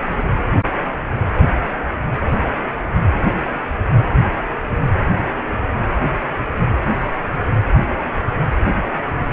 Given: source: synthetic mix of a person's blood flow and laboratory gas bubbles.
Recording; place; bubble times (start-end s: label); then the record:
Doppler ultrasound of blood flow; precordium
no bubbles
From the record:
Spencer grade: 0 (complete lack of bubble signals)